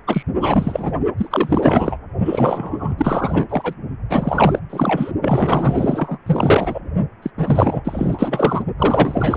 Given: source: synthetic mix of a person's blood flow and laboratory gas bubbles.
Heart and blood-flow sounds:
Doppler ultrasound of blood flow; precordium
0.07-0.22 s: bubbles
0.35-0.93 s: bubbles
1.17-1.97 s: bubbles
2.25-2.95 s: bubbles
2.97-3.46 s: bubbles
3.49-3.74 s: bubbles
4.10-4.59 s: bubbles
4.70-5.12 s: bubbles
5.21-6.18 s: bubbles
6.26-6.80 s: bubbles
7.22-7.31 s: bubbles
7.37-8.62 s: bubbles
8.79-9.37 s: bubbles
From the record:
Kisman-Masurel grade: 444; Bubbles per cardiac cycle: continuous sound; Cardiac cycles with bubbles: 100%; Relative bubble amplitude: maximal (0.775 to 0.999); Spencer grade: 4 (maximum detectable bubble signal sounding continuously throughout systole and diastole of every cardiac period, and overriding the amplitude of the normal cardiac signals); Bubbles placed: only in the low amplitude regions of the cardiac cycle

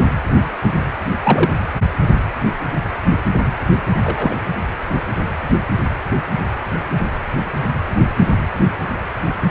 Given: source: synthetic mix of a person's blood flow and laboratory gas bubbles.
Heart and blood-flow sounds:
Doppler ultrasound of blood flow; precordium
1.23-1.51 s: bubbles
4.04-4.37 s: bubbles
From the record:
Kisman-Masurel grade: 112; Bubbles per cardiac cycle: 1 to 2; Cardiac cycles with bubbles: 1 to 10%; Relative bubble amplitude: moderate (0.250 to 0.450); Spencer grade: 1 (occasional bubble signal discernible with the cardiac motion signal, with majority of cardiac periods free of bubbles); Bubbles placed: anywhere in the cardiac cycle

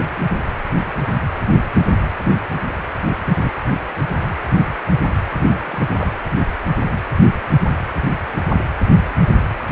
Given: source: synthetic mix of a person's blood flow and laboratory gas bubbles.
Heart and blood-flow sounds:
Doppler ultrasound of blood flow; precordium
5.34-6.12 s: bubbles
From the record:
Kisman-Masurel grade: 221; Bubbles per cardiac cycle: several, 3 to 8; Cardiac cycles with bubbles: 10 to 50%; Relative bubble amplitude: barely perceptible (0.100 to 0.250); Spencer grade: 2 (many but less than half of the cardiac periods contain bubble signals, singularly or in groups); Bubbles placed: anywhere in the cardiac cycle

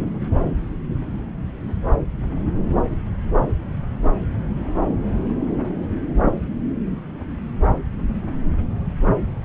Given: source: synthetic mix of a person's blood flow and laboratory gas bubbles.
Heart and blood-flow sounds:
Doppler ultrasound of blood flow; subclavian vein
no bubbles
From the record:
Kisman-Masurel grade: 000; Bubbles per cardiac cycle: 0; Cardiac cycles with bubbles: 0%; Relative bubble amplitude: no bubbles discernible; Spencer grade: 0 (complete lack of bubble signals)

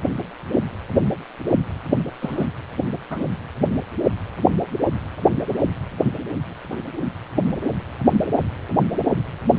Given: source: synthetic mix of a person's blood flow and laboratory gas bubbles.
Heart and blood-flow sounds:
Doppler ultrasound of blood flow; precordium
2.20-2.47 s: bubbles
3.10-3.22 s: bubbles
6.71-6.76 s: bubbles
From the record:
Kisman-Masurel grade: 121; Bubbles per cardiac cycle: 1 to 2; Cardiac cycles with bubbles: 10 to 50%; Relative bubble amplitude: barely perceptible (0.100 to 0.250); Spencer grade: 2 (many but less than half of the cardiac periods contain bubble signals, singularly or in groups); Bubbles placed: anywhere in the cardiac cycle

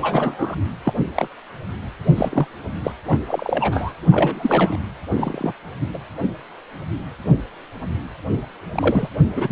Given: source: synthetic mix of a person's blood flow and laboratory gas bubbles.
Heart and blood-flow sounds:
Doppler ultrasound of blood flow; precordium
0.01-0.56 s: bubbles
0.84-0.93 s: bubbles
1.15-1.27 s: bubbles
2.16-2.46 s: bubbles
2.83-2.92 s: bubbles
3.06-3.19 s: bubbles
3.28-3.92 s: bubbles
4.10-4.79 s: bubbles
5.10-5.53 s: bubbles
5.93-5.99 s: bubbles
8.72-9.09 s: bubbles
9.35-9.52 s: bubbles
From the record:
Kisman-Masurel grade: 232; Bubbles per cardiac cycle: several, 3 to 8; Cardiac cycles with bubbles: 50 to 99%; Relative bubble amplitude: moderate (0.250 to 0.450); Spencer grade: 3 (all of the cardiac periods contain showers or single bubble signals, but not dominating or overriding the cardiac motion signals); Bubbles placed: anywhere in the cardiac cycle

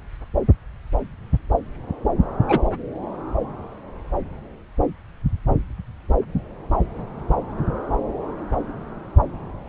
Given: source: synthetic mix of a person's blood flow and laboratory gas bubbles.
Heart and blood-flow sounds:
Doppler ultrasound of blood flow; subclavian vein
2.48-2.59 s: bubbles
From the record:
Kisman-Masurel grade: 113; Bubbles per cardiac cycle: 1 to 2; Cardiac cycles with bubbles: 1 to 10%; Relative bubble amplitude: loud (0.450 to 0.775); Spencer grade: 1 (occasional bubble signal discernible with the cardiac motion signal, with majority of cardiac periods free of bubbles); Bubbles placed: anywhere in the cardiac cycle

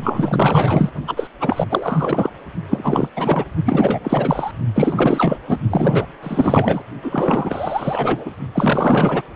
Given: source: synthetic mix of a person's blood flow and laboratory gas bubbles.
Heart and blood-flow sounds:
Doppler ultrasound of blood flow; precordium
0.01-0.91 s: bubbles
1.07-1.27 s: bubbles
1.40-1.68 s: bubbles
1.71-2.29 s: bubbles
2.69-3.08 s: bubbles
3.16-3.44 s: bubbles
3.65-4.51 s: bubbles
4.75-5.38 s: bubbles
5.47-5.59 s: bubbles
5.70-6.07 s: bubbles
6.21-6.82 s: bubbles
7.01-8.31 s: bubbles
8.54-9.22 s: bubbles
From the record:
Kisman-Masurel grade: 444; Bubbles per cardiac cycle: continuous sound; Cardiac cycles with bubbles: 100%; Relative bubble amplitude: maximal (0.775 to 0.999); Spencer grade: 4 (maximum detectable bubble signal sounding continuously throughout systole and diastole of every cardiac period, and overriding the amplitude of the normal cardiac signals); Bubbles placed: only in the low amplitude regions of the cardiac cycle

